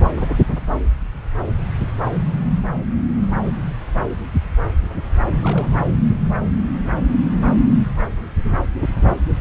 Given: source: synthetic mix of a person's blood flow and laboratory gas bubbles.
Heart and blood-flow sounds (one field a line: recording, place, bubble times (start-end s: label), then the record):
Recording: Doppler ultrasound of blood flow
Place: subclavian vein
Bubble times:
5.43-5.86 s: bubbles
From the record:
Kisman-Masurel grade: 211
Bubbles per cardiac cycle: several, 3 to 8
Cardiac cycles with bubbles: 1 to 10%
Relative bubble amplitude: barely perceptible (0.100 to 0.250)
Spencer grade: 1 (occasional bubble signal discernible with the cardiac motion signal, with majority of cardiac periods free of bubbles)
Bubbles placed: anywhere in the cardiac cycle